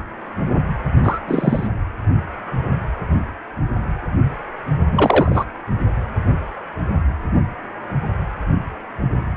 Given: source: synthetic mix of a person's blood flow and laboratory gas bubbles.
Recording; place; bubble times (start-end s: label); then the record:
Doppler ultrasound of blood flow; precordium
1.04-1.20 s: bubbles
1.28-1.68 s: bubbles
4.91-5.46 s: bubbles
From the record:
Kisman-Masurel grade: 223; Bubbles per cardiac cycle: several, 3 to 8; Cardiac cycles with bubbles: 10 to 50%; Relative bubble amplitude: loud (0.450 to 0.775); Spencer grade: 2 (many but less than half of the cardiac periods contain bubble signals, singularly or in groups); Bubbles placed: only in the low amplitude regions of the cardiac cycle